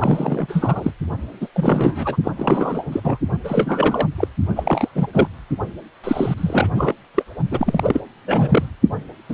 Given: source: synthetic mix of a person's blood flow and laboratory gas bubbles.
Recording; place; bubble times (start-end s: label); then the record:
Doppler ultrasound of blood flow; precordium
0.00-0.92 s: bubbles
1.41-1.47 s: bubbles
1.54-2.17 s: bubbles
2.24-2.32 s: bubbles
2.37-2.85 s: bubbles
2.92-3.00 s: bubbles
3.04-3.18 s: bubbles
3.44-4.06 s: bubbles
4.17-4.27 s: bubbles
4.55-4.88 s: bubbles
4.95-5.06 s: bubbles
5.13-5.27 s: bubbles
6.04-6.34 s: bubbles
6.38-6.68 s: bubbles
6.75-6.94 s: bubbles
7.14-7.23 s: bubbles
7.51-8.01 s: bubbles
8.27-8.68 s: bubbles
9.29-9.34 s: bubbles
From the record:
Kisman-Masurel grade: 342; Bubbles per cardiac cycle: rolling drumbeat, 9 or more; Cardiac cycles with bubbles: 100%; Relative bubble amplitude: moderate (0.250 to 0.450); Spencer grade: 3 (all of the cardiac periods contain showers or single bubble signals, but not dominating or overriding the cardiac motion signals); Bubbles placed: only in the low amplitude regions of the cardiac cycle